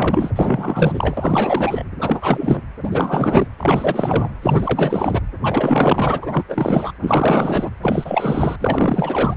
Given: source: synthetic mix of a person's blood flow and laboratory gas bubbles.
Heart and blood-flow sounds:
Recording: Doppler ultrasound of blood flow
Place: precordium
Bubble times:
0.00-1.83 s: bubbles
1.98-2.62 s: bubbles
2.83-3.47 s: bubbles
3.58-4.30 s: bubbles
4.42-5.21 s: bubbles
5.41-6.44 s: bubbles
6.48-6.92 s: bubbles
7.00-7.70 s: bubbles
7.82-8.56 s: bubbles
8.60-9.34 s: bubbles
From the record:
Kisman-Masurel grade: 444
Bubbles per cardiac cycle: continuous sound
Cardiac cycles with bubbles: 100%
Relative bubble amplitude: maximal (0.775 to 0.999)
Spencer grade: 4 (maximum detectable bubble signal sounding continuously throughout systole and diastole of every cardiac period, and overriding the amplitude of the normal cardiac signals)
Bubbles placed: anywhere in the cardiac cycle

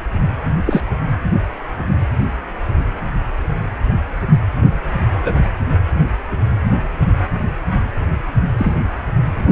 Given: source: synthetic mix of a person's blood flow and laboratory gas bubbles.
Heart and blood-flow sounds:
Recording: Doppler ultrasound of blood flow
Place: precordium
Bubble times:
0.66-0.83 s: bubbles
5.24-5.32 s: bubbles
8.58-8.73 s: bubbles
From the record:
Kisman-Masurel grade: 123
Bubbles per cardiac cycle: 1 to 2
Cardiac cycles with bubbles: 10 to 50%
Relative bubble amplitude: loud (0.450 to 0.775)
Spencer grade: 2 (many but less than half of the cardiac periods contain bubble signals, singularly or in groups)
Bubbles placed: anywhere in the cardiac cycle

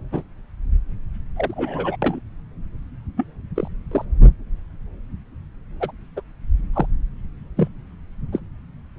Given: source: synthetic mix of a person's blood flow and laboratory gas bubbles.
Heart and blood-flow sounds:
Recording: Doppler ultrasound of blood flow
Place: subclavian vein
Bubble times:
0.11-0.22 s: bubbles
1.36-1.96 s: bubbles
2.02-2.20 s: bubbles
3.17-3.26 s: bubbles
3.56-3.67 s: bubbles
3.91-4.05 s: bubbles
5.80-5.92 s: bubbles
6.17-6.21 s: bubbles
6.73-6.86 s: bubbles
7.57-7.68 s: bubbles
8.32-8.40 s: bubbles
From the record:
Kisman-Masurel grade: 122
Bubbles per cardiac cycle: 1 to 2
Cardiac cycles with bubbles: 10 to 50%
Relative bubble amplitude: moderate (0.250 to 0.450)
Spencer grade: 2 (many but less than half of the cardiac periods contain bubble signals, singularly or in groups)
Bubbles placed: anywhere in the cardiac cycle

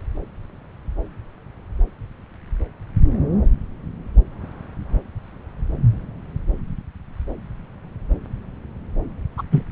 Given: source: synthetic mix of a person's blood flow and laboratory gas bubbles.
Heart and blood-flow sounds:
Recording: Doppler ultrasound of blood flow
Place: subclavian vein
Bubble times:
9.37-9.42 s: bubbles
9.51-9.62 s: bubbles
From the record:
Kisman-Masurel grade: 113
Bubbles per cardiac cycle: 1 to 2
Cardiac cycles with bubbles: 1 to 10%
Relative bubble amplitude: loud (0.450 to 0.775)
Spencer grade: 1 (occasional bubble signal discernible with the cardiac motion signal, with majority of cardiac periods free of bubbles)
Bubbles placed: anywhere in the cardiac cycle

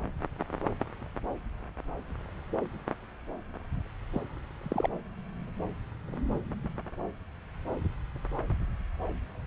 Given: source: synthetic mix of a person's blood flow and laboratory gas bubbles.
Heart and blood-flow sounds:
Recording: Doppler ultrasound of blood flow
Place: subclavian vein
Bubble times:
4.14-4.21 s: bubbles
4.63-4.89 s: bubbles
From the record:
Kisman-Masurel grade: 211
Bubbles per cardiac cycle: several, 3 to 8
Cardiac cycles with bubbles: 1 to 10%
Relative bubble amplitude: barely perceptible (0.100 to 0.250)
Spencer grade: 1 (occasional bubble signal discernible with the cardiac motion signal, with majority of cardiac periods free of bubbles)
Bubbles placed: anywhere in the cardiac cycle

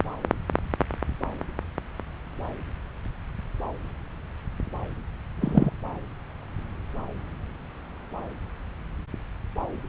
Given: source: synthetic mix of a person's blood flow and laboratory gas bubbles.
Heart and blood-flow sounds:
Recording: Doppler ultrasound of blood flow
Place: subclavian vein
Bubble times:
5.41-5.71 s: bubbles
From the record:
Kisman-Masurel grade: 113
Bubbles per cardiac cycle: 1 to 2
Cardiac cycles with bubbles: 1 to 10%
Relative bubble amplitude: loud (0.450 to 0.775)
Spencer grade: 1 (occasional bubble signal discernible with the cardiac motion signal, with majority of cardiac periods free of bubbles)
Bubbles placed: anywhere in the cardiac cycle

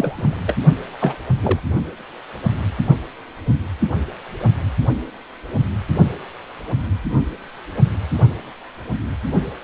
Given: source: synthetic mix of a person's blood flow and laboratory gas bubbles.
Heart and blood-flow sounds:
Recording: Doppler ultrasound of blood flow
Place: precordium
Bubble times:
0.00-0.37 s: bubbles
0.47-0.54 s: bubbles
1.00-1.16 s: bubbles
1.43-1.60 s: bubbles
From the record:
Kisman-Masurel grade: 222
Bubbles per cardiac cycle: several, 3 to 8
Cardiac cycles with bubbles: 10 to 50%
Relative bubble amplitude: moderate (0.250 to 0.450)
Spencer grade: 2 (many but less than half of the cardiac periods contain bubble signals, singularly or in groups)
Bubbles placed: only in the low amplitude regions of the cardiac cycle

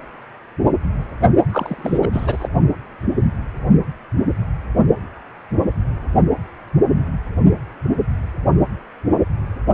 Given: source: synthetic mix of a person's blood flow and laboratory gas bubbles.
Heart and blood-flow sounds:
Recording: Doppler ultrasound of blood flow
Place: precordium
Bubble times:
1.50-2.07 s: bubbles
2.12-2.48 s: bubbles
From the record:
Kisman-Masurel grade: 212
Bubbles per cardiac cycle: several, 3 to 8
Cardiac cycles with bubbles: 1 to 10%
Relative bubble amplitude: moderate (0.250 to 0.450)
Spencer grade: 1 (occasional bubble signal discernible with the cardiac motion signal, with majority of cardiac periods free of bubbles)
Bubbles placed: only in the low amplitude regions of the cardiac cycle

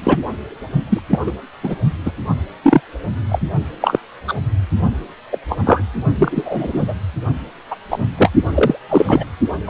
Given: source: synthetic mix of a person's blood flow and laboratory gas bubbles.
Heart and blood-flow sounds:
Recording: Doppler ultrasound of blood flow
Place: precordium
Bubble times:
0.03-0.19 s: bubbles
0.89-1.00 s: bubbles
1.09-1.19 s: bubbles
1.26-1.32 s: bubbles
1.64-1.76 s: bubbles
2.05-2.11 s: bubbles
2.64-2.81 s: bubbles
3.29-3.39 s: bubbles
3.81-3.99 s: bubbles
4.27-4.35 s: bubbles
5.31-5.38 s: bubbles
5.49-5.57 s: bubbles
5.64-5.83 s: bubbles
6.15-6.95 s: bubbles
7.70-7.75 s: bubbles
7.90-7.98 s: bubbles
8.17-8.30 s: bubbles
8.51-8.80 s: bubbles
8.88-9.26 s: bubbles
9.65-9.70 s: bubbles
From the record:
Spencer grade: 3 (all of the cardiac periods contain showers or single bubble signals, but not dominating or overriding the cardiac motion signals)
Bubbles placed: only in the low amplitude regions of the cardiac cycle

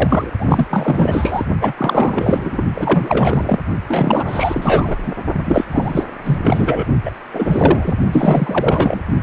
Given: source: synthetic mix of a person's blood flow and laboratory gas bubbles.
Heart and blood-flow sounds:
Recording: Doppler ultrasound of blood flow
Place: precordium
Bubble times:
0.00-0.31 s: bubbles
0.38-0.67 s: bubbles
0.69-1.45 s: bubbles
1.59-1.73 s: bubbles
1.78-2.63 s: bubbles
2.75-3.59 s: bubbles
3.88-4.96 s: bubbles
5.03-5.12 s: bubbles
5.32-5.66 s: bubbles
5.70-6.04 s: bubbles
6.23-6.41 s: bubbles
6.44-6.85 s: bubbles
7.05-7.11 s: bubbles
7.33-7.94 s: bubbles
8.12-9.02 s: bubbles
9.21-9.23 s: bubbles
From the record:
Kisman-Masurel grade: 444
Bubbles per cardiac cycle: continuous sound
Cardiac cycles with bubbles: 100%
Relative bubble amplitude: maximal (0.775 to 0.999)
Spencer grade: 4 (maximum detectable bubble signal sounding continuously throughout systole and diastole of every cardiac period, and overriding the amplitude of the normal cardiac signals)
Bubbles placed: only in the low amplitude regions of the cardiac cycle

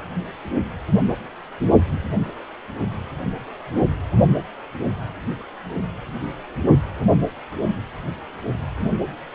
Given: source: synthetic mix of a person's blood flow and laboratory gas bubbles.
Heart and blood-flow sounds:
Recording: Doppler ultrasound of blood flow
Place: precordium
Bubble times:
no bubbles
From the record:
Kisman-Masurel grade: 000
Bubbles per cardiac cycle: 0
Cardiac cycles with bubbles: 0%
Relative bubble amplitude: no bubbles discernible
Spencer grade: 0 (complete lack of bubble signals)

